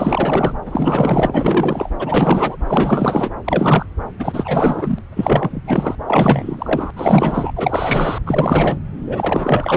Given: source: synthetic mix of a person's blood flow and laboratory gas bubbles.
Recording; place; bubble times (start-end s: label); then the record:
Doppler ultrasound of blood flow; subclavian vein
0.00-0.53 s: bubbles
0.65-1.89 s: bubbles
1.99-2.57 s: bubbles
2.67-3.31 s: bubbles
3.44-3.86 s: bubbles
4.19-4.99 s: bubbles
5.16-5.62 s: bubbles
5.67-5.96 s: bubbles
6.07-6.91 s: bubbles
6.96-7.52 s: bubbles
7.56-8.18 s: bubbles
8.25-8.79 s: bubbles
9.06-9.77 s: bubbles
From the record:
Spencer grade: 4 (maximum detectable bubble signal sounding continuously throughout systole and diastole of every cardiac period, and overriding the amplitude of the normal cardiac signals); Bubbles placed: anywhere in the cardiac cycle